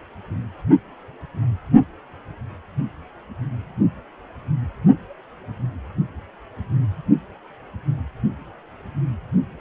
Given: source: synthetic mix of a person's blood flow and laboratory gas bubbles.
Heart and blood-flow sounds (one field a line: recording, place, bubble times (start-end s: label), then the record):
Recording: Doppler ultrasound of blood flow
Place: precordium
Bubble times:
no bubbles
From the record:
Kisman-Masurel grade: 000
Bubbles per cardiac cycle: 0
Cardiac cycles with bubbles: 0%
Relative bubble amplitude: no bubbles discernible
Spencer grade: 0 (complete lack of bubble signals)